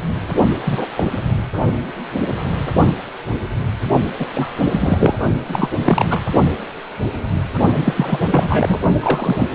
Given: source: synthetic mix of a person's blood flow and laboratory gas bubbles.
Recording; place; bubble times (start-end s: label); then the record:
Doppler ultrasound of blood flow; precordium
0.65-0.86 s: bubbles
0.95-1.03 s: bubbles
4.19-4.27 s: bubbles
4.33-4.54 s: bubbles
4.71-5.15 s: bubbles
5.46-5.69 s: bubbles
5.84-6.23 s: bubbles
7.85-8.19 s: bubbles
8.31-8.79 s: bubbles
8.98-9.47 s: bubbles
From the record:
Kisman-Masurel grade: 233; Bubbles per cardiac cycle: several, 3 to 8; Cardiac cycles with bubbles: 50 to 99%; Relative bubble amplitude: loud (0.450 to 0.775); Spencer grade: 3 (all of the cardiac periods contain showers or single bubble signals, but not dominating or overriding the cardiac motion signals); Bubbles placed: only in the low amplitude regions of the cardiac cycle